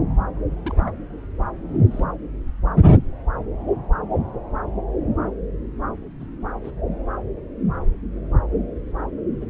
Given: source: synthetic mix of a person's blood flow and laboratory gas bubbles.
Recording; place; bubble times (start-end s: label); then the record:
Doppler ultrasound of blood flow; subclavian vein
0.65-0.91 s: bubbles
1.91-2.04 s: bubbles
6.21-6.25 s: bubbles
6.64-6.71 s: bubbles
9.41-9.46 s: bubbles
From the record:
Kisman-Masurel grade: 121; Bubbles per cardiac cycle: 1 to 2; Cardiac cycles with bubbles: 10 to 50%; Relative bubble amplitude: barely perceptible (0.100 to 0.250); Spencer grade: 2 (many but less than half of the cardiac periods contain bubble signals, singularly or in groups); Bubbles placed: anywhere in the cardiac cycle